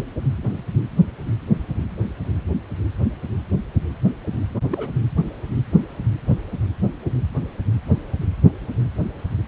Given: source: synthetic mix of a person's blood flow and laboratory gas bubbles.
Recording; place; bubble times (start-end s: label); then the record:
Doppler ultrasound of blood flow; precordium
4.70-4.91 s: bubbles
From the record:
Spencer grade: 1 (occasional bubble signal discernible with the cardiac motion signal, with majority of cardiac periods free of bubbles); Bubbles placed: anywhere in the cardiac cycle